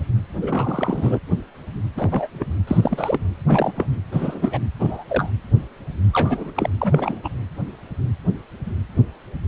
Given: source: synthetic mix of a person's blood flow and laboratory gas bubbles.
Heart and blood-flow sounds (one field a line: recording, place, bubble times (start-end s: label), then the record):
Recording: Doppler ultrasound of blood flow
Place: precordium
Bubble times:
0.41-1.20 s: bubbles
1.96-2.28 s: bubbles
2.34-2.46 s: bubbles
2.67-3.19 s: bubbles
3.46-3.72 s: bubbles
3.75-3.88 s: bubbles
4.12-4.58 s: bubbles
4.79-5.04 s: bubbles
5.08-5.30 s: bubbles
6.12-6.53 s: bubbles
6.56-6.70 s: bubbles
6.81-7.20 s: bubbles
7.24-7.29 s: bubbles
From the record:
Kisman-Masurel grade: 232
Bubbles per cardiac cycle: several, 3 to 8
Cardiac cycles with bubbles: 50 to 99%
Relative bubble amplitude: moderate (0.250 to 0.450)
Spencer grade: 3 (all of the cardiac periods contain showers or single bubble signals, but not dominating or overriding the cardiac motion signals)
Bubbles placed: anywhere in the cardiac cycle